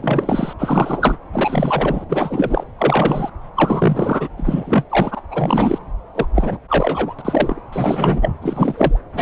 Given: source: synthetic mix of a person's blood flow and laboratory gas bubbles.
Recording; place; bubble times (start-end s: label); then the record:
Doppler ultrasound of blood flow; subclavian vein
0.00-0.53 s: bubbles
0.58-1.17 s: bubbles
1.32-2.04 s: bubbles
2.09-2.63 s: bubbles
2.79-3.30 s: bubbles
3.55-4.28 s: bubbles
4.37-4.84 s: bubbles
4.89-5.21 s: bubbles
5.29-5.79 s: bubbles
6.14-6.25 s: bubbles
6.34-6.58 s: bubbles
6.69-7.14 s: bubbles
7.18-7.22 s: bubbles
7.25-7.62 s: bubbles
7.72-8.33 s: bubbles
8.41-8.99 s: bubbles
9.13-9.22 s: bubbles
From the record:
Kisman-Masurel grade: 343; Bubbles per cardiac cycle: rolling drumbeat, 9 or more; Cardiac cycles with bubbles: 100%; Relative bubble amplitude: loud (0.450 to 0.775); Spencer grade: 3 (all of the cardiac periods contain showers or single bubble signals, but not dominating or overriding the cardiac motion signals); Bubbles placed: anywhere in the cardiac cycle